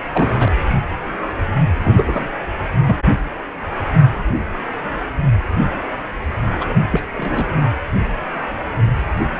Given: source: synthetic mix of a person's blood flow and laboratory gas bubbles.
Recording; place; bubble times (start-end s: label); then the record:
Doppler ultrasound of blood flow; precordium
0.12-0.51 s: bubbles
1.84-2.29 s: bubbles
2.86-2.97 s: bubbles
6.60-6.66 s: bubbles
6.68-6.74 s: bubbles
6.92-7.03 s: bubbles
7.14-7.46 s: bubbles
From the record:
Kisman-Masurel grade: 222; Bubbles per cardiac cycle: several, 3 to 8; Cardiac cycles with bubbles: 10 to 50%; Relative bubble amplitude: moderate (0.250 to 0.450); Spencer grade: 2 (many but less than half of the cardiac periods contain bubble signals, singularly or in groups); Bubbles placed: anywhere in the cardiac cycle